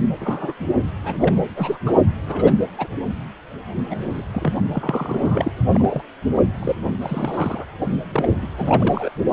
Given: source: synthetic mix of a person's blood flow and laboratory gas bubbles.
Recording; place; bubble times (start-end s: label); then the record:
Doppler ultrasound of blood flow; precordium
0.20-0.53 s: bubbles
1.03-1.15 s: bubbles
1.19-1.38 s: bubbles
1.56-1.78 s: bubbles
1.86-1.93 s: bubbles
2.26-2.69 s: bubbles
2.79-2.87 s: bubbles
3.90-3.96 s: bubbles
3.98-4.22 s: bubbles
4.33-4.54 s: bubbles
4.72-5.53 s: bubbles
5.72-6.02 s: bubbles
6.59-6.75 s: bubbles
7.01-7.65 s: bubbles
8.12-8.37 s: bubbles
8.41-8.48 s: bubbles
8.57-9.10 s: bubbles
From the record:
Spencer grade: 3 (all of the cardiac periods contain showers or single bubble signals, but not dominating or overriding the cardiac motion signals); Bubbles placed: only in the low amplitude regions of the cardiac cycle